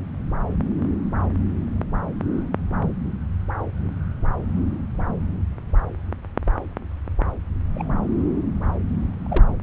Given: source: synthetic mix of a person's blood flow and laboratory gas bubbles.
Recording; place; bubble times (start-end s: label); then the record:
Doppler ultrasound of blood flow; subclavian vein
7.73-7.88 s: bubbles
9.29-9.45 s: bubbles
From the record:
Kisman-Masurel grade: 121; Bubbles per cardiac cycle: 1 to 2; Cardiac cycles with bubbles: 10 to 50%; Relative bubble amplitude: barely perceptible (0.100 to 0.250); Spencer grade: 2 (many but less than half of the cardiac periods contain bubble signals, singularly or in groups); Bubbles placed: anywhere in the cardiac cycle